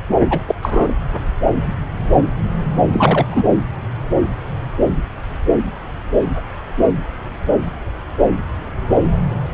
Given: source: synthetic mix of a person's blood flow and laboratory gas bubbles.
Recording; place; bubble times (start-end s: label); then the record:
Doppler ultrasound of blood flow; subclavian vein
0.30-0.38 s: bubbles
0.48-0.55 s: bubbles
0.62-0.93 s: bubbles
2.93-3.44 s: bubbles
From the record:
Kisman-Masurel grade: 213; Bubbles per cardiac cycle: several, 3 to 8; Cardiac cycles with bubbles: 1 to 10%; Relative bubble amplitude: loud (0.450 to 0.775); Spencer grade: 1 (occasional bubble signal discernible with the cardiac motion signal, with majority of cardiac periods free of bubbles); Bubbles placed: anywhere in the cardiac cycle